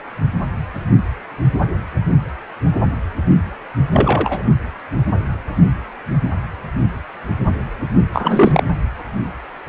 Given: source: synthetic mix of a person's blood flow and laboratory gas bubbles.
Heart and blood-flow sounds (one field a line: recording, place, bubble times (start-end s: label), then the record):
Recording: Doppler ultrasound of blood flow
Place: precordium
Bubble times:
3.92-4.43 s: bubbles
8.13-8.63 s: bubbles
From the record:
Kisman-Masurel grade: 213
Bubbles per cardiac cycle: several, 3 to 8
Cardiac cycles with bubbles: 1 to 10%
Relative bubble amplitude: loud (0.450 to 0.775)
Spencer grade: 1 (occasional bubble signal discernible with the cardiac motion signal, with majority of cardiac periods free of bubbles)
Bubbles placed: anywhere in the cardiac cycle